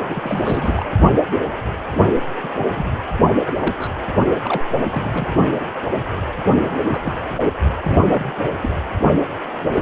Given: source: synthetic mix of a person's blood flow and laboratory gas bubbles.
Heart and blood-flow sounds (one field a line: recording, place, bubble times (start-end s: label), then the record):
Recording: Doppler ultrasound of blood flow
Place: precordium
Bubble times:
0.09-0.85 s: bubbles
1.11-1.17 s: bubbles
1.91-1.99 s: bubbles
2.43-2.49 s: bubbles
2.71-2.85 s: bubbles
3.47-3.76 s: bubbles
3.78-3.88 s: bubbles
4.19-4.27 s: bubbles
4.42-4.63 s: bubbles
4.90-5.40 s: bubbles
5.52-5.65 s: bubbles
5.85-5.89 s: bubbles
6.63-7.18 s: bubbles
7.35-7.46 s: bubbles
7.80-8.03 s: bubbles
8.06-8.33 s: bubbles
8.61-8.70 s: bubbles
9.74-9.82 s: bubbles
From the record:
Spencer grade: 3 (all of the cardiac periods contain showers or single bubble signals, but not dominating or overriding the cardiac motion signals)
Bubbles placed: only in the low amplitude regions of the cardiac cycle